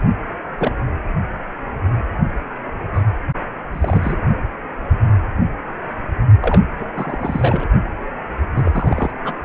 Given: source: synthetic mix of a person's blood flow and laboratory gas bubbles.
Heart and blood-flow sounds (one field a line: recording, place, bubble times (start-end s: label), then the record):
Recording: Doppler ultrasound of blood flow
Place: precordium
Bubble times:
0.00-0.02 s: bubbles
0.58-0.75 s: bubbles
2.94-3.02 s: bubbles
3.72-4.19 s: bubbles
6.41-6.61 s: bubbles
6.78-6.86 s: bubbles
6.95-7.69 s: bubbles
8.55-9.13 s: bubbles
9.25-9.35 s: bubbles
From the record:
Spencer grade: 2 (many but less than half of the cardiac periods contain bubble signals, singularly or in groups)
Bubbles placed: anywhere in the cardiac cycle